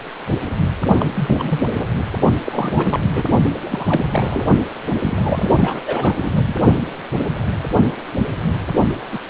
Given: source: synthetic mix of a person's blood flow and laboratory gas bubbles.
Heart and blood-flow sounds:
Doppler ultrasound of blood flow; precordium
0.98-1.05 s: bubbles
1.15-1.29 s: bubbles
1.36-1.60 s: bubbles
1.65-1.85 s: bubbles
1.96-2.04 s: bubbles
2.46-3.00 s: bubbles
3.15-3.23 s: bubbles
3.65-4.50 s: bubbles
4.99-5.82 s: bubbles
5.86-6.54 s: bubbles
9.11-9.20 s: bubbles
9.28-9.30 s: bubbles
From the record:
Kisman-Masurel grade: 332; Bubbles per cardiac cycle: rolling drumbeat, 9 or more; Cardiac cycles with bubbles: 50 to 99%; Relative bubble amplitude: moderate (0.250 to 0.450); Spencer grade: 3 (all of the cardiac periods contain showers or single bubble signals, but not dominating or overriding the cardiac motion signals); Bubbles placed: only in the low amplitude regions of the cardiac cycle

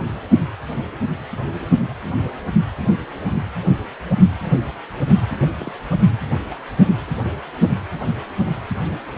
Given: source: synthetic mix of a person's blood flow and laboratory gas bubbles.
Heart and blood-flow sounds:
Doppler ultrasound of blood flow; precordium
5.58-5.72 s: bubbles
6.51-6.57 s: bubbles
From the record:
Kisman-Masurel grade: 111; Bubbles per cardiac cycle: 1 to 2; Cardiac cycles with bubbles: 1 to 10%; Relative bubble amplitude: barely perceptible (0.100 to 0.250); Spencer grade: 1 (occasional bubble signal discernible with the cardiac motion signal, with majority of cardiac periods free of bubbles); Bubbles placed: anywhere in the cardiac cycle

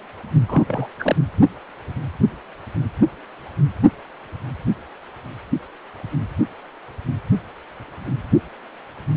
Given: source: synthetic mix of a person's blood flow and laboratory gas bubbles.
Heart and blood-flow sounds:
Doppler ultrasound of blood flow; precordium
0.48-0.87 s: bubbles
0.99-1.16 s: bubbles
From the record:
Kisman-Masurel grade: 212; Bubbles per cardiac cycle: several, 3 to 8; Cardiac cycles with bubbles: 1 to 10%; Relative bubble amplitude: moderate (0.250 to 0.450); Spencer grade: 1 (occasional bubble signal discernible with the cardiac motion signal, with majority of cardiac periods free of bubbles); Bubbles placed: anywhere in the cardiac cycle

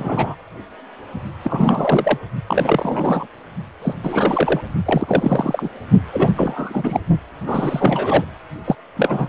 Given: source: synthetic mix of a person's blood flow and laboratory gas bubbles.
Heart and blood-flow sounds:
Doppler ultrasound of blood flow; precordium
0.00-0.35 s: bubbles
1.44-2.17 s: bubbles
2.47-3.27 s: bubbles
3.82-3.95 s: bubbles
4.03-4.61 s: bubbles
4.86-5.68 s: bubbles
6.12-6.32 s: bubbles
6.37-7.00 s: bubbles
7.46-8.24 s: bubbles
8.64-8.76 s: bubbles
8.96-9.29 s: bubbles
From the record:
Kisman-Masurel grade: 342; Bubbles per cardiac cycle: rolling drumbeat, 9 or more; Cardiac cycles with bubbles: 100%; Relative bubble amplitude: moderate (0.250 to 0.450); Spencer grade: 3 (all of the cardiac periods contain showers or single bubble signals, but not dominating or overriding the cardiac motion signals); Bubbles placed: only in the low amplitude regions of the cardiac cycle

